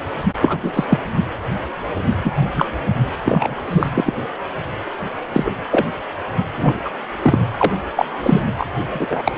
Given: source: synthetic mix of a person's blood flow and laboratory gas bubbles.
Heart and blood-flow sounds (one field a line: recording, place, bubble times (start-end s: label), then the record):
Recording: Doppler ultrasound of blood flow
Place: precordium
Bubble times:
0.00-0.02 s: bubbles
0.42-0.57 s: bubbles
0.62-0.84 s: bubbles
0.90-0.99 s: bubbles
2.23-2.33 s: bubbles
2.53-2.68 s: bubbles
3.25-3.91 s: bubbles
3.94-4.14 s: bubbles
5.33-5.50 s: bubbles
5.71-5.86 s: bubbles
6.57-6.91 s: bubbles
7.22-7.49 s: bubbles
7.58-7.77 s: bubbles
7.96-8.05 s: bubbles
8.22-8.43 s: bubbles
8.58-8.66 s: bubbles
8.93-9.22 s: bubbles
9.25-9.32 s: bubbles
From the record:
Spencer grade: 3 (all of the cardiac periods contain showers or single bubble signals, but not dominating or overriding the cardiac motion signals)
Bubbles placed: anywhere in the cardiac cycle